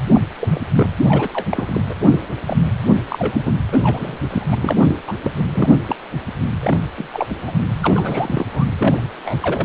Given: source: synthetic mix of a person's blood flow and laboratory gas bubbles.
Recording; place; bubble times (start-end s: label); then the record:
Doppler ultrasound of blood flow; precordium
0.14-0.21 s: bubbles
0.41-0.60 s: bubbles
0.76-0.89 s: bubbles
1.08-1.29 s: bubbles
1.33-1.46 s: bubbles
1.51-1.81 s: bubbles
1.89-1.94 s: bubbles
2.11-2.20 s: bubbles
2.47-2.57 s: bubbles
2.94-3.00 s: bubbles
3.08-3.43 s: bubbles
3.45-3.52 s: bubbles
3.72-4.18 s: bubbles
4.29-4.56 s: bubbles
4.62-4.96 s: bubbles
5.07-5.13 s: bubbles
5.23-5.31 s: bubbles
5.36-5.44 s: bubbles
5.54-5.79 s: bubbles
5.88-5.96 s: bubbles
6.60-6.79 s: bubbles
6.97-7.08 s: bubbles
7.13-7.26 s: bubbles
7.41-7.52 s: bubbles
7.83-8.46 s: bubbles
8.51-8.65 s: bubbles
8.77-9.04 s: bubbles
9.24-9.65 s: bubbles
From the record:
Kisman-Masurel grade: 242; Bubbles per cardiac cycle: several, 3 to 8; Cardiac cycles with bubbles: 100%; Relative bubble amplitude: moderate (0.250 to 0.450); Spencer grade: 3 (all of the cardiac periods contain showers or single bubble signals, but not dominating or overriding the cardiac motion signals); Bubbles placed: anywhere in the cardiac cycle